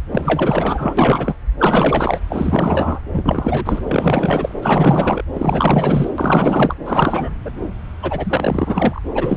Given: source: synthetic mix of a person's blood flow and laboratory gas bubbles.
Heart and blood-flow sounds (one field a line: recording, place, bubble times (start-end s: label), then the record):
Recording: Doppler ultrasound of blood flow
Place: subclavian vein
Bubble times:
0.09-0.95 s: bubbles
0.97-1.34 s: bubbles
1.57-2.20 s: bubbles
2.29-3.00 s: bubbles
3.13-3.82 s: bubbles
3.88-4.54 s: bubbles
4.62-5.22 s: bubbles
5.33-6.07 s: bubbles
6.18-6.75 s: bubbles
6.85-7.33 s: bubbles
7.45-7.50 s: bubbles
8.02-8.99 s: bubbles
9.14-9.37 s: bubbles
From the record:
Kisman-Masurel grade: 444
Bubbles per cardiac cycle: continuous sound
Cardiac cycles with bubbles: 100%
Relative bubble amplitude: maximal (0.775 to 0.999)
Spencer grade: 4 (maximum detectable bubble signal sounding continuously throughout systole and diastole of every cardiac period, and overriding the amplitude of the normal cardiac signals)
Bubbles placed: anywhere in the cardiac cycle